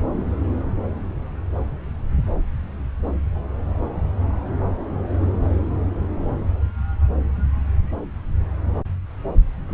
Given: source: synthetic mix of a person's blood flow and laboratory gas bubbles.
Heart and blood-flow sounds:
Doppler ultrasound of blood flow; subclavian vein
9.68-9.74 s: bubbles
From the record:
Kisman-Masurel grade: 212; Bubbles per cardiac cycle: several, 3 to 8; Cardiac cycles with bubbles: 1 to 10%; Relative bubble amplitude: moderate (0.250 to 0.450); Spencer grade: 1 (occasional bubble signal discernible with the cardiac motion signal, with majority of cardiac periods free of bubbles); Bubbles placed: anywhere in the cardiac cycle

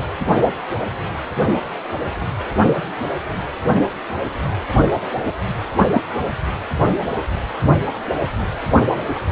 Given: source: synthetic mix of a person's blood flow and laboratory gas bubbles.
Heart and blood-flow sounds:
Doppler ultrasound of blood flow; precordium
5.93-6.01 s: bubbles
From the record:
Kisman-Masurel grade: 113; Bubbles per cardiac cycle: 1 to 2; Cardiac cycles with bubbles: 1 to 10%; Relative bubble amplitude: loud (0.450 to 0.775); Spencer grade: 1 (occasional bubble signal discernible with the cardiac motion signal, with majority of cardiac periods free of bubbles); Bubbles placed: anywhere in the cardiac cycle

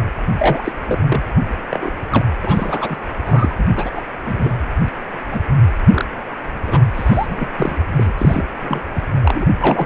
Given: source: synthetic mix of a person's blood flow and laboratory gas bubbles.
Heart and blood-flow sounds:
Doppler ultrasound of blood flow; precordium
0.38-0.72 s: bubbles
0.85-0.99 s: bubbles
1.04-1.23 s: bubbles
1.70-1.92 s: bubbles
2.10-2.26 s: bubbles
2.42-2.98 s: bubbles
3.26-3.55 s: bubbles
3.58-3.65 s: bubbles
3.76-3.91 s: bubbles
3.96-4.02 s: bubbles
4.25-4.61 s: bubbles
5.31-5.41 s: bubbles
5.91-6.05 s: bubbles
6.67-6.85 s: bubbles
6.94-7.27 s: bubbles
7.29-7.50 s: bubbles
7.58-7.77 s: bubbles
7.96-8.13 s: bubbles
8.17-8.45 s: bubbles
8.61-8.82 s: bubbles
8.95-9.01 s: bubbles
9.23-9.46 s: bubbles
9.60-9.86 s: bubbles
From the record:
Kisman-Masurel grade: 242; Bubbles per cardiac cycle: several, 3 to 8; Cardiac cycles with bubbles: 100%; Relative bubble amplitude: moderate (0.250 to 0.450); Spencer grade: 3 (all of the cardiac periods contain showers or single bubble signals, but not dominating or overriding the cardiac motion signals); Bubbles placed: anywhere in the cardiac cycle

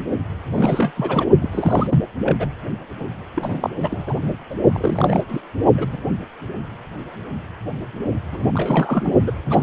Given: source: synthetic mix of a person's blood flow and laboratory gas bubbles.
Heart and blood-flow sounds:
Doppler ultrasound of blood flow; precordium
0.52-0.91 s: bubbles
0.96-1.26 s: bubbles
1.42-1.87 s: bubbles
1.90-2.02 s: bubbles
2.23-2.36 s: bubbles
2.39-2.46 s: bubbles
3.00-3.05 s: bubbles
3.34-3.70 s: bubbles
3.80-4.29 s: bubbles
4.50-4.55 s: bubbles
4.72-5.21 s: bubbles
5.29-5.41 s: bubbles
5.77-5.87 s: bubbles
5.92-5.99 s: bubbles
8.32-8.49 s: bubbles
8.54-9.12 s: bubbles
9.25-9.32 s: bubbles
9.49-9.63 s: bubbles
From the record:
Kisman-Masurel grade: 332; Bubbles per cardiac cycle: rolling drumbeat, 9 or more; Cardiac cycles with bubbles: 50 to 99%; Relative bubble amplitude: moderate (0.250 to 0.450); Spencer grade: 3 (all of the cardiac periods contain showers or single bubble signals, but not dominating or overriding the cardiac motion signals); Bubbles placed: only in the low amplitude regions of the cardiac cycle

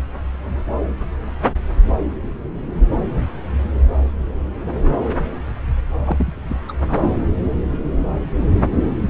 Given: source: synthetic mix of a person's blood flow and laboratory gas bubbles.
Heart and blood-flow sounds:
Doppler ultrasound of blood flow; subclavian vein
6.04-6.44 s: bubbles
6.48-6.61 s: bubbles
6.68-6.72 s: bubbles
6.88-7.19 s: bubbles
From the record:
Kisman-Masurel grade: 211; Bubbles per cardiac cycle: several, 3 to 8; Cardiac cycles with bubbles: 1 to 10%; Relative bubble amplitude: barely perceptible (0.100 to 0.250); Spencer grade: 1 (occasional bubble signal discernible with the cardiac motion signal, with majority of cardiac periods free of bubbles); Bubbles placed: anywhere in the cardiac cycle

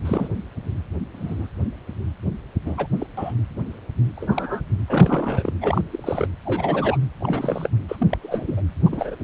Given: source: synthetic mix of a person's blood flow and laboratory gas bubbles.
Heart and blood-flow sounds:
Doppler ultrasound of blood flow; precordium
0.05-0.28 s: bubbles
1.15-1.48 s: bubbles
2.66-2.87 s: bubbles
2.98-3.06 s: bubbles
3.17-3.33 s: bubbles
4.16-4.61 s: bubbles
4.88-5.54 s: bubbles
5.61-5.82 s: bubbles
5.92-6.26 s: bubbles
6.45-6.98 s: bubbles
7.20-7.68 s: bubbles
7.89-8.06 s: bubbles
8.09-8.16 s: bubbles
8.22-8.62 s: bubbles
8.85-9.15 s: bubbles
From the record:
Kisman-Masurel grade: 242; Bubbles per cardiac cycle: several, 3 to 8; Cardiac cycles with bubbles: 100%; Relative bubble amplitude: moderate (0.250 to 0.450); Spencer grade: 3 (all of the cardiac periods contain showers or single bubble signals, but not dominating or overriding the cardiac motion signals); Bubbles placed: anywhere in the cardiac cycle

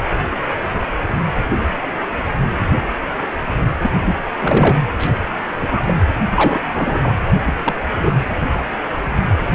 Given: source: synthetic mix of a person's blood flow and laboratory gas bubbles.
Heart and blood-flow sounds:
Doppler ultrasound of blood flow; precordium
3.81-3.90 s: bubbles
4.04-4.16 s: bubbles
4.39-4.82 s: bubbles
4.99-5.07 s: bubbles
5.55-5.67 s: bubbles
5.71-5.80 s: bubbles
5.86-5.93 s: bubbles
6.34-6.60 s: bubbles
6.72-7.14 s: bubbles
7.46-7.54 s: bubbles
7.64-7.74 s: bubbles
7.92-8.15 s: bubbles
From the record:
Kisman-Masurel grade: 222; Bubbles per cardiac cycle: several, 3 to 8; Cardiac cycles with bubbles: 10 to 50%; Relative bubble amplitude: moderate (0.250 to 0.450); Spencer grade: 2 (many but less than half of the cardiac periods contain bubble signals, singularly or in groups); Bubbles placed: anywhere in the cardiac cycle

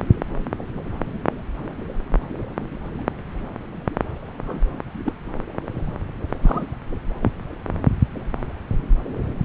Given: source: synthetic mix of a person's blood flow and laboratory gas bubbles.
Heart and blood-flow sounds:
Doppler ultrasound of blood flow; subclavian vein
4.42-4.66 s: bubbles
5.06-5.12 s: bubbles
6.42-6.64 s: bubbles
7.22-7.31 s: bubbles
From the record:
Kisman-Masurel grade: 121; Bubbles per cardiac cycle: 1 to 2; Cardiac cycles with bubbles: 10 to 50%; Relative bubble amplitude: barely perceptible (0.100 to 0.250); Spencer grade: 2 (many but less than half of the cardiac periods contain bubble signals, singularly or in groups); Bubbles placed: anywhere in the cardiac cycle

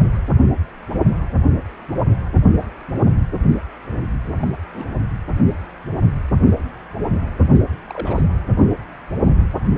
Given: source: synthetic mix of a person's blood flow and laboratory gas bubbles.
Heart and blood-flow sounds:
Doppler ultrasound of blood flow; precordium
4.41-4.51 s: bubbles
4.71-4.94 s: bubbles
7.54-7.62 s: bubbles
7.87-8.23 s: bubbles
From the record:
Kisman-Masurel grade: 221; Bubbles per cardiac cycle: several, 3 to 8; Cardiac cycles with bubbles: 10 to 50%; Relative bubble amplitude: barely perceptible (0.100 to 0.250); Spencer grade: 2 (many but less than half of the cardiac periods contain bubble signals, singularly or in groups); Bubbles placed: anywhere in the cardiac cycle

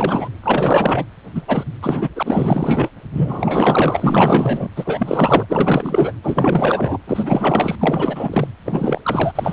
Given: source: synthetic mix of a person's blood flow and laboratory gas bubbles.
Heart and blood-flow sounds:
Doppler ultrasound of blood flow; precordium
0.00-0.28 s: bubbles
0.43-1.05 s: bubbles
1.35-1.42 s: bubbles
1.47-1.64 s: bubbles
1.82-2.09 s: bubbles
2.16-2.89 s: bubbles
3.13-4.68 s: bubbles
4.75-5.45 s: bubbles
5.48-6.13 s: bubbles
6.23-6.98 s: bubbles
7.07-8.48 s: bubbles
8.66-9.32 s: bubbles
9.35-9.53 s: bubbles
From the record:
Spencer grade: 4 (maximum detectable bubble signal sounding continuously throughout systole and diastole of every cardiac period, and overriding the amplitude of the normal cardiac signals); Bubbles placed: anywhere in the cardiac cycle

